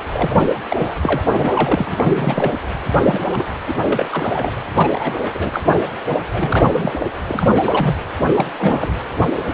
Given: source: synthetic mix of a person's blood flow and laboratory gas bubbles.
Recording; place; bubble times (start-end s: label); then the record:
Doppler ultrasound of blood flow; precordium
0.14-0.60 s: bubbles
0.70-0.93 s: bubbles
1.02-1.22 s: bubbles
1.30-2.52 s: bubbles
3.04-3.44 s: bubbles
3.67-3.74 s: bubbles
3.81-4.51 s: bubbles
4.76-5.19 s: bubbles
5.34-5.62 s: bubbles
5.69-5.79 s: bubbles
6.30-6.93 s: bubbles
6.98-7.06 s: bubbles
7.25-7.49 s: bubbles
7.52-7.95 s: bubbles
8.28-8.49 s: bubbles
8.59-8.92 s: bubbles
From the record:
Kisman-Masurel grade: 342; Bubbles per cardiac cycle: rolling drumbeat, 9 or more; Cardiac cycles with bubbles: 100%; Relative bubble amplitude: moderate (0.250 to 0.450); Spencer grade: 3 (all of the cardiac periods contain showers or single bubble signals, but not dominating or overriding the cardiac motion signals); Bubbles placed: anywhere in the cardiac cycle